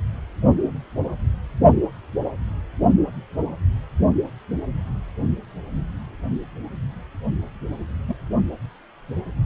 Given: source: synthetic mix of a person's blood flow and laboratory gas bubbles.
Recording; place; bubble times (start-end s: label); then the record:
Doppler ultrasound of blood flow; precordium
8.08-8.16 s: bubbles
From the record:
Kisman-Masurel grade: 111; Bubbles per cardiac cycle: 1 to 2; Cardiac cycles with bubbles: 1 to 10%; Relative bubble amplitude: barely perceptible (0.100 to 0.250); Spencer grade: 1 (occasional bubble signal discernible with the cardiac motion signal, with majority of cardiac periods free of bubbles); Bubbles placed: only in the low amplitude regions of the cardiac cycle